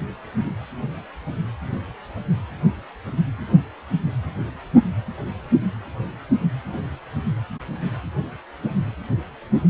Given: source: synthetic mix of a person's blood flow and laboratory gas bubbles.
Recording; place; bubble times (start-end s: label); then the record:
Doppler ultrasound of blood flow; precordium
6.73-6.82 s: bubbles
From the record:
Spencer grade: 1 (occasional bubble signal discernible with the cardiac motion signal, with majority of cardiac periods free of bubbles); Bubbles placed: anywhere in the cardiac cycle